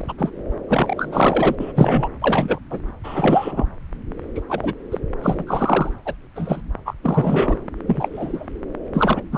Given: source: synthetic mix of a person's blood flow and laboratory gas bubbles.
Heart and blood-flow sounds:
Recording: Doppler ultrasound of blood flow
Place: subclavian vein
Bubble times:
0.00-0.14 s: bubbles
0.17-0.32 s: bubbles
0.68-1.55 s: bubbles
1.60-2.08 s: bubbles
2.21-2.59 s: bubbles
2.70-2.80 s: bubbles
3.04-3.66 s: bubbles
4.35-4.42 s: bubbles
4.49-4.74 s: bubbles
4.91-4.99 s: bubbles
5.22-5.93 s: bubbles
6.05-6.14 s: bubbles
6.35-6.62 s: bubbles
6.85-6.94 s: bubbles
7.03-7.57 s: bubbles
7.87-8.08 s: bubbles
8.12-8.46 s: bubbles
8.94-9.22 s: bubbles
9.31-9.38 s: bubbles
From the record:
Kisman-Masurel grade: 243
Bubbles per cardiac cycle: several, 3 to 8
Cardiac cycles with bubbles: 100%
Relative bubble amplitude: loud (0.450 to 0.775)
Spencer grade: 3 (all of the cardiac periods contain showers or single bubble signals, but not dominating or overriding the cardiac motion signals)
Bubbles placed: anywhere in the cardiac cycle

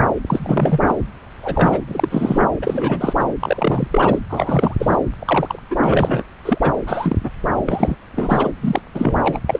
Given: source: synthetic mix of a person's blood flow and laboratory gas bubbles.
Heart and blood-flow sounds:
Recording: Doppler ultrasound of blood flow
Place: subclavian vein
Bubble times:
0.27-0.81 s: bubbles
0.86-0.95 s: bubbles
1.42-1.84 s: bubbles
1.88-2.46 s: bubbles
2.62-3.14 s: bubbles
3.19-3.25 s: bubbles
3.40-4.19 s: bubbles
4.29-4.75 s: bubbles
4.79-4.97 s: bubbles
5.19-5.59 s: bubbles
5.70-6.23 s: bubbles
6.45-6.58 s: bubbles
6.61-6.73 s: bubbles
6.87-7.16 s: bubbles
7.23-7.30 s: bubbles
7.66-7.95 s: bubbles
8.15-8.52 s: bubbles
8.61-8.81 s: bubbles
8.94-9.39 s: bubbles
9.47-9.60 s: bubbles
From the record:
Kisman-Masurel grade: 343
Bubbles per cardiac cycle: rolling drumbeat, 9 or more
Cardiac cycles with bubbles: 100%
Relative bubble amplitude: loud (0.450 to 0.775)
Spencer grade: 3 (all of the cardiac periods contain showers or single bubble signals, but not dominating or overriding the cardiac motion signals)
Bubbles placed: anywhere in the cardiac cycle

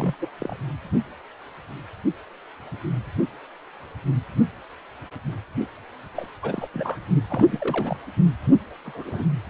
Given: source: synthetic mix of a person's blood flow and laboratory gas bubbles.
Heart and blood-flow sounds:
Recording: Doppler ultrasound of blood flow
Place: precordium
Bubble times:
0.00-0.14 s: bubbles
0.21-0.29 s: bubbles
0.39-0.56 s: bubbles
6.14-6.26 s: bubbles
6.42-6.67 s: bubbles
6.73-6.99 s: bubbles
7.30-7.97 s: bubbles
8.85-9.28 s: bubbles
From the record:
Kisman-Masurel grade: 221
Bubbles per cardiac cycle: several, 3 to 8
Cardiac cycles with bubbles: 10 to 50%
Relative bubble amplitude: barely perceptible (0.100 to 0.250)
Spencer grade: 2 (many but less than half of the cardiac periods contain bubble signals, singularly or in groups)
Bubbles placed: anywhere in the cardiac cycle

